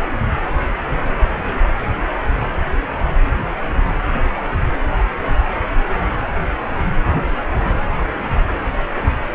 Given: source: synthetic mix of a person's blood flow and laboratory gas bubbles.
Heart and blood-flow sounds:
Doppler ultrasound of blood flow; precordium
7.52-7.78 s: bubbles
From the record:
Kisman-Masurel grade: 211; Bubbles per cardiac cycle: several, 3 to 8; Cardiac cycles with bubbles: 1 to 10%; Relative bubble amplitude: barely perceptible (0.100 to 0.250); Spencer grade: 1 (occasional bubble signal discernible with the cardiac motion signal, with majority of cardiac periods free of bubbles); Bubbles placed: only in the low amplitude regions of the cardiac cycle

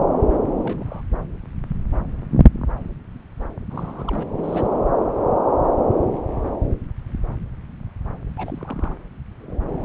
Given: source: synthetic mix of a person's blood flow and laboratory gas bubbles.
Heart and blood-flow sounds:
Doppler ultrasound of blood flow; subclavian vein
0.59-1.02 s: bubbles
3.70-4.24 s: bubbles
4.33-4.78 s: bubbles
8.37-8.95 s: bubbles
From the record:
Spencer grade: 2 (many but less than half of the cardiac periods contain bubble signals, singularly or in groups); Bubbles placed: anywhere in the cardiac cycle

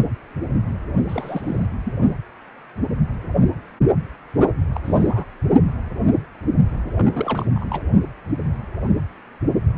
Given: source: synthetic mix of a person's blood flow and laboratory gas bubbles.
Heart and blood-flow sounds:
Doppler ultrasound of blood flow; precordium
1.08-1.66 s: bubbles
1.84-1.93 s: bubbles
4.73-4.81 s: bubbles
4.85-5.25 s: bubbles
6.71-6.91 s: bubbles
6.96-7.49 s: bubbles
7.55-7.83 s: bubbles
From the record:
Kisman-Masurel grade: 221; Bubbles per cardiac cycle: several, 3 to 8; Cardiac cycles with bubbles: 10 to 50%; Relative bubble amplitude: barely perceptible (0.100 to 0.250); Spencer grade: 2 (many but less than half of the cardiac periods contain bubble signals, singularly or in groups); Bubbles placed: only in the low amplitude regions of the cardiac cycle

